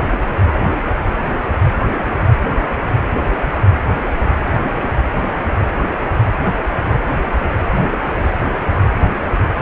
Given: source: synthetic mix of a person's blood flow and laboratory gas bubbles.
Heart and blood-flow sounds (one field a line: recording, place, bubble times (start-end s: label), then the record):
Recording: Doppler ultrasound of blood flow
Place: precordium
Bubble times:
no bubbles
From the record:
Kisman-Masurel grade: 000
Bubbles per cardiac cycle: 0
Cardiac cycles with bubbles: 0%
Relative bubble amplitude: no bubbles discernible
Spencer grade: 0 (complete lack of bubble signals)